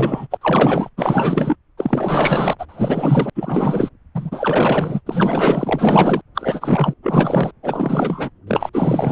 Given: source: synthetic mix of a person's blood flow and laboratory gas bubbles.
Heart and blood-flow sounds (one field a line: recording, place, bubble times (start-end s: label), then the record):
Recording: Doppler ultrasound of blood flow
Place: subclavian vein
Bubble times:
0.00-0.27 s: bubbles
0.31-0.37 s: bubbles
0.41-0.90 s: bubbles
0.97-1.56 s: bubbles
1.77-2.56 s: bubbles
2.58-2.66 s: bubbles
2.69-3.30 s: bubbles
3.35-3.89 s: bubbles
4.14-5.01 s: bubbles
5.06-6.21 s: bubbles
6.34-6.94 s: bubbles
7.03-7.51 s: bubbles
7.62-8.30 s: bubbles
8.47-8.70 s: bubbles
8.73-9.12 s: bubbles
From the record:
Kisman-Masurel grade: 444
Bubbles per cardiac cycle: continuous sound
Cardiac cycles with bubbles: 100%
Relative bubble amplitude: maximal (0.775 to 0.999)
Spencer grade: 4 (maximum detectable bubble signal sounding continuously throughout systole and diastole of every cardiac period, and overriding the amplitude of the normal cardiac signals)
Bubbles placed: anywhere in the cardiac cycle